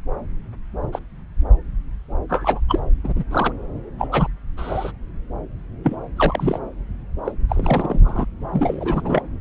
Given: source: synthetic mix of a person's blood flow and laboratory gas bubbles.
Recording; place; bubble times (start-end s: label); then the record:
Doppler ultrasound of blood flow; subclavian vein
0.92-0.99 s: bubbles
2.29-2.60 s: bubbles
2.69-2.80 s: bubbles
3.04-3.24 s: bubbles
3.31-3.53 s: bubbles
3.98-4.08 s: bubbles
4.11-4.28 s: bubbles
4.57-4.92 s: bubbles
5.83-5.96 s: bubbles
6.16-6.59 s: bubbles
7.24-7.32 s: bubbles
7.49-7.99 s: bubbles
8.03-8.25 s: bubbles
8.53-9.23 s: bubbles
From the record:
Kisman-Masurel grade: 242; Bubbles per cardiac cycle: several, 3 to 8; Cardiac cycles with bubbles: 100%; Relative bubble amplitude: moderate (0.250 to 0.450); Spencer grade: 3 (all of the cardiac periods contain showers or single bubble signals, but not dominating or overriding the cardiac motion signals); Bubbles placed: anywhere in the cardiac cycle